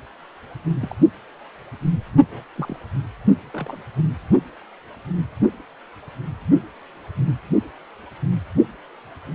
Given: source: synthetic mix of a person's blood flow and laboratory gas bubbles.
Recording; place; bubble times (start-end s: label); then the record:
Doppler ultrasound of blood flow; precordium
0.80-0.95 s: bubbles
2.29-2.44 s: bubbles
2.56-2.79 s: bubbles
3.54-3.83 s: bubbles
From the record:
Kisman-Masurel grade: 121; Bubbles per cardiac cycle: 1 to 2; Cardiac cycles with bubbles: 10 to 50%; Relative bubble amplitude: barely perceptible (0.100 to 0.250); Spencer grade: 2 (many but less than half of the cardiac periods contain bubble signals, singularly or in groups); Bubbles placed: anywhere in the cardiac cycle